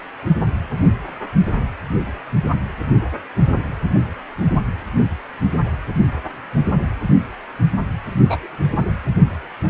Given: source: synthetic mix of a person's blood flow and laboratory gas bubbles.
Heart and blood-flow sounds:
Doppler ultrasound of blood flow; precordium
8.20-8.48 s: bubbles
8.86-8.92 s: bubbles
From the record:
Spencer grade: 1 (occasional bubble signal discernible with the cardiac motion signal, with majority of cardiac periods free of bubbles); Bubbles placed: anywhere in the cardiac cycle

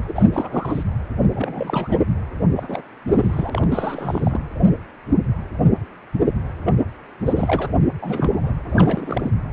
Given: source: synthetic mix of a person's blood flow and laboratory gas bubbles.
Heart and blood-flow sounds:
Doppler ultrasound of blood flow; precordium
0.07-0.30 s: bubbles
0.32-0.84 s: bubbles
1.32-2.00 s: bubbles
2.56-2.82 s: bubbles
3.07-4.40 s: bubbles
6.65-6.73 s: bubbles
7.25-7.72 s: bubbles
8.01-8.54 s: bubbles
8.70-9.30 s: bubbles
From the record:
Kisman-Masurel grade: 332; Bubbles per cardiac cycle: rolling drumbeat, 9 or more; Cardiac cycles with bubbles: 50 to 99%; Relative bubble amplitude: moderate (0.250 to 0.450); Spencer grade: 3 (all of the cardiac periods contain showers or single bubble signals, but not dominating or overriding the cardiac motion signals); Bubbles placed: anywhere in the cardiac cycle

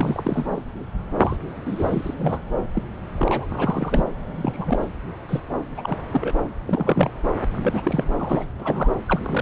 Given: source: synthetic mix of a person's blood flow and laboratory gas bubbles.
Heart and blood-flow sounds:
Doppler ultrasound of blood flow; subclavian vein
0.00-0.62 s: bubbles
1.19-1.37 s: bubbles
1.65-2.14 s: bubbles
2.18-2.41 s: bubbles
2.73-2.82 s: bubbles
3.17-3.46 s: bubbles
3.51-4.05 s: bubbles
4.34-4.82 s: bubbles
5.29-5.40 s: bubbles
5.77-5.97 s: bubbles
6.10-6.31 s: bubbles
6.67-7.11 s: bubbles
7.52-8.04 s: bubbles
8.19-8.45 s: bubbles
8.60-8.93 s: bubbles
9.07-9.20 s: bubbles
9.23-9.41 s: bubbles
From the record:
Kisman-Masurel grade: 242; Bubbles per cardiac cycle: several, 3 to 8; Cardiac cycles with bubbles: 100%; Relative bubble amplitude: moderate (0.250 to 0.450); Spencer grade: 3 (all of the cardiac periods contain showers or single bubble signals, but not dominating or overriding the cardiac motion signals); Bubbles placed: anywhere in the cardiac cycle

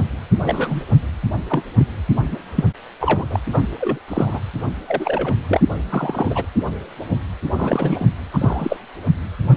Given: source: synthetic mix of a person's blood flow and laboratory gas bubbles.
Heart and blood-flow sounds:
Doppler ultrasound of blood flow; precordium
0.43-0.83 s: bubbles
1.50-1.62 s: bubbles
1.77-1.86 s: bubbles
2.31-2.36 s: bubbles
2.55-2.65 s: bubbles
3.00-3.40 s: bubbles
3.52-3.61 s: bubbles
3.80-3.99 s: bubbles
4.08-4.39 s: bubbles
4.88-5.35 s: bubbles
5.47-5.61 s: bubbles
5.89-6.46 s: bubbles
7.55-8.06 s: bubbles
8.33-8.78 s: bubbles
From the record:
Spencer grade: 3 (all of the cardiac periods contain showers or single bubble signals, but not dominating or overriding the cardiac motion signals); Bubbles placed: anywhere in the cardiac cycle

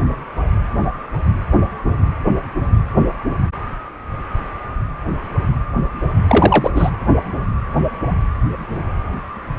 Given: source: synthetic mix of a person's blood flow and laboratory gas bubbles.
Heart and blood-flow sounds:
Doppler ultrasound of blood flow; precordium
6.27-6.71 s: bubbles
6.75-6.91 s: bubbles
From the record:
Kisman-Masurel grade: 213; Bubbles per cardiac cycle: several, 3 to 8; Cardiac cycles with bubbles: 1 to 10%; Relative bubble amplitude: loud (0.450 to 0.775); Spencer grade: 1 (occasional bubble signal discernible with the cardiac motion signal, with majority of cardiac periods free of bubbles); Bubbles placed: anywhere in the cardiac cycle

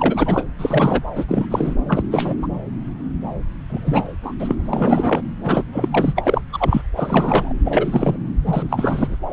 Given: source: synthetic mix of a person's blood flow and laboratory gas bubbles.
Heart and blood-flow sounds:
Doppler ultrasound of blood flow; subclavian vein
0.00-0.44 s: bubbles
0.58-1.04 s: bubbles
1.15-1.26 s: bubbles
1.28-1.46 s: bubbles
1.51-1.75 s: bubbles
1.88-2.04 s: bubbles
2.11-2.35 s: bubbles
2.42-2.48 s: bubbles
3.69-4.08 s: bubbles
4.22-4.35 s: bubbles
4.39-4.55 s: bubbles
4.58-4.61 s: bubbles
4.64-5.22 s: bubbles
5.42-5.64 s: bubbles
5.72-5.89 s: bubbles
5.91-6.41 s: bubbles
6.52-6.81 s: bubbles
6.95-7.53 s: bubbles
7.64-8.18 s: bubbles
8.46-9.16 s: bubbles
9.30-9.33 s: bubbles
From the record:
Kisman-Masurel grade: 333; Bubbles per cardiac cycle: rolling drumbeat, 9 or more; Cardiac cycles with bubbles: 50 to 99%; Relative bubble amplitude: loud (0.450 to 0.775); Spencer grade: 3 (all of the cardiac periods contain showers or single bubble signals, but not dominating or overriding the cardiac motion signals); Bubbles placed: anywhere in the cardiac cycle

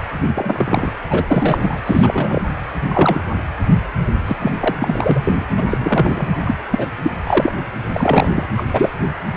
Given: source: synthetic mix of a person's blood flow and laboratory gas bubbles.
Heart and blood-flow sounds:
Doppler ultrasound of blood flow; precordium
0.00-0.04 s: bubbles
0.34-0.91 s: bubbles
1.10-1.81 s: bubbles
1.86-2.42 s: bubbles
2.87-3.27 s: bubbles
4.26-4.37 s: bubbles
4.39-4.51 s: bubbles
4.59-4.75 s: bubbles
4.79-5.45 s: bubbles
5.56-5.63 s: bubbles
5.69-6.27 s: bubbles
6.43-6.54 s: bubbles
6.71-6.89 s: bubbles
7.04-7.15 s: bubbles
7.23-7.53 s: bubbles
7.94-8.29 s: bubbles
8.35-8.47 s: bubbles
8.57-8.65 s: bubbles
8.73-8.89 s: bubbles
From the record:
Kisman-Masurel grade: 243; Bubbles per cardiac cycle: several, 3 to 8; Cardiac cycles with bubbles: 100%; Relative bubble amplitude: loud (0.450 to 0.775); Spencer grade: 3 (all of the cardiac periods contain showers or single bubble signals, but not dominating or overriding the cardiac motion signals); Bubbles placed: anywhere in the cardiac cycle

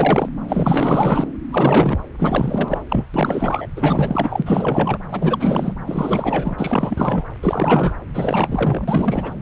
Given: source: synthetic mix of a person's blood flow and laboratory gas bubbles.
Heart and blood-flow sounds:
Doppler ultrasound of blood flow; subclavian vein
0.00-0.29 s: bubbles
0.48-1.27 s: bubbles
1.49-1.98 s: bubbles
2.19-2.81 s: bubbles
2.88-3.06 s: bubbles
3.14-3.68 s: bubbles
3.76-4.43 s: bubbles
4.46-4.98 s: bubbles
5.09-5.74 s: bubbles
5.86-7.24 s: bubbles
7.43-7.94 s: bubbles
8.14-9.33 s: bubbles
From the record:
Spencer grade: 4 (maximum detectable bubble signal sounding continuously throughout systole and diastole of every cardiac period, and overriding the amplitude of the normal cardiac signals); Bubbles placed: anywhere in the cardiac cycle

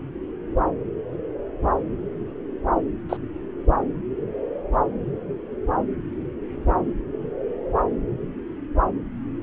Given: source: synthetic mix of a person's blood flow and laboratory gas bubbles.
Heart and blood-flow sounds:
Doppler ultrasound of blood flow; subclavian vein
3.09-3.17 s: bubbles
From the record:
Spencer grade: 1 (occasional bubble signal discernible with the cardiac motion signal, with majority of cardiac periods free of bubbles); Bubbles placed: anywhere in the cardiac cycle

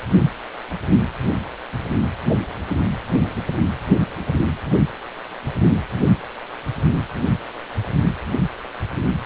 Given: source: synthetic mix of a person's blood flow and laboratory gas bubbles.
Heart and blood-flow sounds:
Doppler ultrasound of blood flow; precordium
no bubbles
From the record:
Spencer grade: 0 (complete lack of bubble signals)

